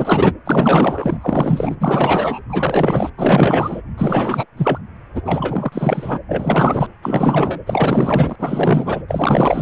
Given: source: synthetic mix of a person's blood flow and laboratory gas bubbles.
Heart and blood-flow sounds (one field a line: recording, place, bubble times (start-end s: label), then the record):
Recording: Doppler ultrasound of blood flow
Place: precordium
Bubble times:
0.00-0.34 s: bubbles
0.45-1.76 s: bubbles
1.79-2.40 s: bubbles
2.49-3.10 s: bubbles
3.17-3.81 s: bubbles
3.98-4.46 s: bubbles
4.56-4.79 s: bubbles
5.14-5.21 s: bubbles
5.25-6.19 s: bubbles
6.28-6.87 s: bubbles
7.02-7.60 s: bubbles
7.67-8.36 s: bubbles
8.38-9.03 s: bubbles
9.09-9.62 s: bubbles
From the record:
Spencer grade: 4 (maximum detectable bubble signal sounding continuously throughout systole and diastole of every cardiac period, and overriding the amplitude of the normal cardiac signals)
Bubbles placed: anywhere in the cardiac cycle